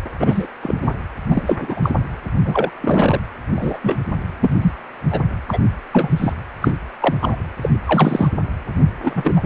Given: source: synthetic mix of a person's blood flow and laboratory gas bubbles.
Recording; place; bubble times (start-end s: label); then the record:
Doppler ultrasound of blood flow; precordium
0.19-0.47 s: bubbles
0.62-0.89 s: bubbles
1.27-1.93 s: bubbles
2.44-2.71 s: bubbles
2.81-3.20 s: bubbles
3.55-3.79 s: bubbles
3.82-3.97 s: bubbles
4.40-4.71 s: bubbles
5.09-5.22 s: bubbles
5.49-5.58 s: bubbles
5.92-6.33 s: bubbles
6.61-6.73 s: bubbles
7.00-7.15 s: bubbles
7.20-7.37 s: bubbles
7.61-7.69 s: bubbles
7.85-8.28 s: bubbles
9.02-9.42 s: bubbles
From the record:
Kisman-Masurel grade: 243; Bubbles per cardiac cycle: several, 3 to 8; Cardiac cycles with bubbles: 100%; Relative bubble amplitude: loud (0.450 to 0.775); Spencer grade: 3 (all of the cardiac periods contain showers or single bubble signals, but not dominating or overriding the cardiac motion signals); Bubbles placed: anywhere in the cardiac cycle